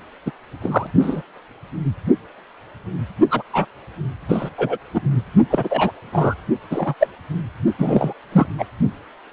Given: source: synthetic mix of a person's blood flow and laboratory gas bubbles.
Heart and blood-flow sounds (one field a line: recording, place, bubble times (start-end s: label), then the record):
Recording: Doppler ultrasound of blood flow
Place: precordium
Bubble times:
0.26-0.31 s: bubbles
0.61-0.87 s: bubbles
1.00-1.22 s: bubbles
3.30-3.42 s: bubbles
3.53-3.65 s: bubbles
4.28-4.50 s: bubbles
4.58-4.78 s: bubbles
4.94-5.02 s: bubbles
5.50-5.92 s: bubbles
6.12-6.35 s: bubbles
6.71-6.94 s: bubbles
7.00-7.08 s: bubbles
7.78-8.13 s: bubbles
8.32-8.46 s: bubbles
8.58-8.65 s: bubbles
From the record:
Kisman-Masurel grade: 233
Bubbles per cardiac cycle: several, 3 to 8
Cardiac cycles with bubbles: 50 to 99%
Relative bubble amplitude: loud (0.450 to 0.775)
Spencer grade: 3 (all of the cardiac periods contain showers or single bubble signals, but not dominating or overriding the cardiac motion signals)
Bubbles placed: only in the low amplitude regions of the cardiac cycle